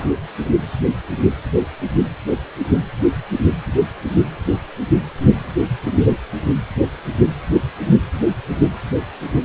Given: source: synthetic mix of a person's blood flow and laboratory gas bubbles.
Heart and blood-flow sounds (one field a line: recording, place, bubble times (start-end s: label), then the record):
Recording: Doppler ultrasound of blood flow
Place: precordium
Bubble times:
0.00-0.10 s: bubbles
From the record:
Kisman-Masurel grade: 111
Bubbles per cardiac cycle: 1 to 2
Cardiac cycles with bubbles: 1 to 10%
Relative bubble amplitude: barely perceptible (0.100 to 0.250)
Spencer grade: 1 (occasional bubble signal discernible with the cardiac motion signal, with majority of cardiac periods free of bubbles)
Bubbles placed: anywhere in the cardiac cycle